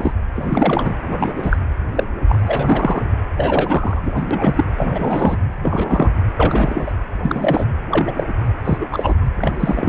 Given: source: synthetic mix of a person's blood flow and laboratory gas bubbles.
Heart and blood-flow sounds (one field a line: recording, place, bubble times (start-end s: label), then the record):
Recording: Doppler ultrasound of blood flow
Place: precordium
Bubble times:
0.00-0.14 s: bubbles
0.33-0.94 s: bubbles
1.02-1.16 s: bubbles
1.19-1.33 s: bubbles
1.35-1.57 s: bubbles
1.95-2.04 s: bubbles
2.29-3.03 s: bubbles
3.37-4.12 s: bubbles
4.15-4.23 s: bubbles
4.31-4.64 s: bubbles
4.78-5.37 s: bubbles
5.63-6.09 s: bubbles
6.36-6.92 s: bubbles
7.22-7.66 s: bubbles
7.91-8.12 s: bubbles
8.15-8.24 s: bubbles
8.64-8.77 s: bubbles
8.80-8.85 s: bubbles
8.91-9.14 s: bubbles
9.37-9.52 s: bubbles
9.59-9.89 s: bubbles
From the record:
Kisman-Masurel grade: 243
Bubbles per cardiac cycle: several, 3 to 8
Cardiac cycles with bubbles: 100%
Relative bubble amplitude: loud (0.450 to 0.775)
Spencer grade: 3 (all of the cardiac periods contain showers or single bubble signals, but not dominating or overriding the cardiac motion signals)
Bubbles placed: anywhere in the cardiac cycle